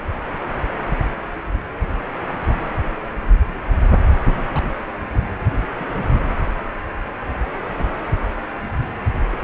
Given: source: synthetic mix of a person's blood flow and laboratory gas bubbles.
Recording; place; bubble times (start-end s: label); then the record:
Doppler ultrasound of blood flow; precordium
2.27-2.32 s: bubbles
4.53-4.70 s: bubbles
5.12-5.24 s: bubbles
5.80-5.86 s: bubbles
9.31-9.37 s: bubbles
From the record:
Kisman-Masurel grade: 121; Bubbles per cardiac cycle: 1 to 2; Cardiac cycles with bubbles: 10 to 50%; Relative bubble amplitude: barely perceptible (0.100 to 0.250); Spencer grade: 2 (many but less than half of the cardiac periods contain bubble signals, singularly or in groups); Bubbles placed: anywhere in the cardiac cycle